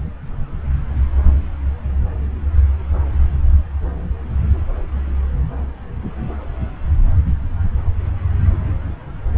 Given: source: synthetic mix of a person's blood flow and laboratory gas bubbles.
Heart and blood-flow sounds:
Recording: Doppler ultrasound of blood flow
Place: subclavian vein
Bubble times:
no bubbles
From the record:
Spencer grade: 0 (complete lack of bubble signals)

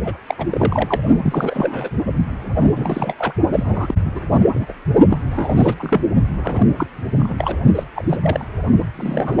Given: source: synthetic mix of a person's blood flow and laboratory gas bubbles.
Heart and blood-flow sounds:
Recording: Doppler ultrasound of blood flow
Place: precordium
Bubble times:
0.04-0.18 s: bubbles
0.27-0.35 s: bubbles
0.38-0.46 s: bubbles
0.51-1.00 s: bubbles
1.22-1.90 s: bubbles
2.60-3.14 s: bubbles
3.18-3.33 s: bubbles
3.55-3.95 s: bubbles
4.05-4.21 s: bubbles
4.54-4.72 s: bubbles
5.08-5.17 s: bubbles
5.31-5.75 s: bubbles
5.79-6.00 s: bubbles
6.37-6.67 s: bubbles
6.78-6.87 s: bubbles
7.17-7.57 s: bubbles
7.75-7.83 s: bubbles
7.95-8.04 s: bubbles
8.08-8.17 s: bubbles
8.22-8.45 s: bubbles
8.95-9.40 s: bubbles
From the record:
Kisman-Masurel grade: 342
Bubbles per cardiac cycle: rolling drumbeat, 9 or more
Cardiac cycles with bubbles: 100%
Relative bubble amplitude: moderate (0.250 to 0.450)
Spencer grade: 3 (all of the cardiac periods contain showers or single bubble signals, but not dominating or overriding the cardiac motion signals)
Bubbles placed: only in the low amplitude regions of the cardiac cycle

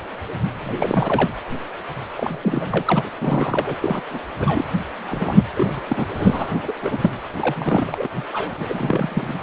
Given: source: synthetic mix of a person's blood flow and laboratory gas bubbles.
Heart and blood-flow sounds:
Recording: Doppler ultrasound of blood flow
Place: precordium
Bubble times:
0.62-1.30 s: bubbles
2.15-3.03 s: bubbles
3.21-3.78 s: bubbles
3.80-4.02 s: bubbles
4.10-4.19 s: bubbles
4.39-4.67 s: bubbles
5.10-5.46 s: bubbles
5.56-5.83 s: bubbles
5.88-6.06 s: bubbles
6.16-6.73 s: bubbles
6.82-7.11 s: bubbles
7.40-8.08 s: bubbles
8.15-8.24 s: bubbles
8.33-8.54 s: bubbles
8.60-9.34 s: bubbles
From the record:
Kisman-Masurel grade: 332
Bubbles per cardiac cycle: rolling drumbeat, 9 or more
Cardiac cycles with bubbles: 50 to 99%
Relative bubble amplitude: moderate (0.250 to 0.450)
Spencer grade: 3 (all of the cardiac periods contain showers or single bubble signals, but not dominating or overriding the cardiac motion signals)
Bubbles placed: anywhere in the cardiac cycle

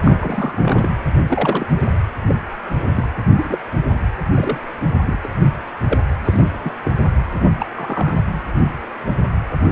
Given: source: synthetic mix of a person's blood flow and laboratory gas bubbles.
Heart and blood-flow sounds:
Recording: Doppler ultrasound of blood flow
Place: precordium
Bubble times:
0.06-0.94 s: bubbles
1.28-1.66 s: bubbles
2.28-2.35 s: bubbles
2.96-3.07 s: bubbles
3.38-3.58 s: bubbles
3.74-3.99 s: bubbles
4.34-4.58 s: bubbles
5.05-5.20 s: bubbles
5.23-5.29 s: bubbles
5.88-6.01 s: bubbles
6.25-6.44 s: bubbles
6.53-6.73 s: bubbles
6.85-6.92 s: bubbles
7.60-7.66 s: bubbles
7.75-8.43 s: bubbles
From the record:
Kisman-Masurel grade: 232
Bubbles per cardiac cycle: several, 3 to 8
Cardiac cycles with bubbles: 50 to 99%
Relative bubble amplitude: moderate (0.250 to 0.450)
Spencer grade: 3 (all of the cardiac periods contain showers or single bubble signals, but not dominating or overriding the cardiac motion signals)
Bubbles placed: anywhere in the cardiac cycle

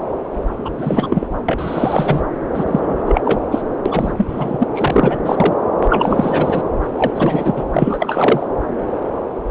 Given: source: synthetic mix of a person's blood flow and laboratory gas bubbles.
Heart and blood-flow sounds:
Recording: Doppler ultrasound of blood flow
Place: subclavian vein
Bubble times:
0.65-0.70 s: bubbles
0.77-1.27 s: bubbles
1.48-2.22 s: bubbles
2.54-2.65 s: bubbles
2.67-3.02 s: bubbles
3.06-3.22 s: bubbles
3.25-3.40 s: bubbles
3.51-3.62 s: bubbles
3.85-4.12 s: bubbles
4.17-4.67 s: bubbles
4.75-5.17 s: bubbles
5.25-5.54 s: bubbles
5.82-6.62 s: bubbles
6.96-7.11 s: bubbles
7.14-7.63 s: bubbles
7.72-8.46 s: bubbles
From the record:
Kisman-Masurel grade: 333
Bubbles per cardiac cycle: rolling drumbeat, 9 or more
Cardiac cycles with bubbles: 50 to 99%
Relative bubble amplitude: loud (0.450 to 0.775)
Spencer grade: 3 (all of the cardiac periods contain showers or single bubble signals, but not dominating or overriding the cardiac motion signals)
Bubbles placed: anywhere in the cardiac cycle

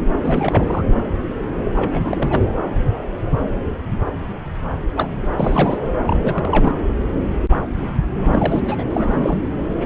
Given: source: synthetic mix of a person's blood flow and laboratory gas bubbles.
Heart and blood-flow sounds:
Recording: Doppler ultrasound of blood flow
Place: subclavian vein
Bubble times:
0.22-0.83 s: bubbles
1.75-2.51 s: bubbles
4.96-5.08 s: bubbles
5.34-5.78 s: bubbles
6.05-6.75 s: bubbles
8.12-8.84 s: bubbles
8.91-9.54 s: bubbles
From the record:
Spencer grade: 3 (all of the cardiac periods contain showers or single bubble signals, but not dominating or overriding the cardiac motion signals)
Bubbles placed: anywhere in the cardiac cycle

